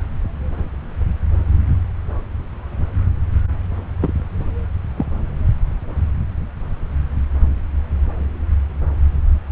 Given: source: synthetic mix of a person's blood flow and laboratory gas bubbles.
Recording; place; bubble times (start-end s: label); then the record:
Doppler ultrasound of blood flow; subclavian vein
4.00-4.13 s: bubbles
4.97-5.06 s: bubbles
From the record:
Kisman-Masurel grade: 122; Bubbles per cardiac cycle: 1 to 2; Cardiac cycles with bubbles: 10 to 50%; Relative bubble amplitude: moderate (0.250 to 0.450); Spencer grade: 2 (many but less than half of the cardiac periods contain bubble signals, singularly or in groups); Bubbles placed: anywhere in the cardiac cycle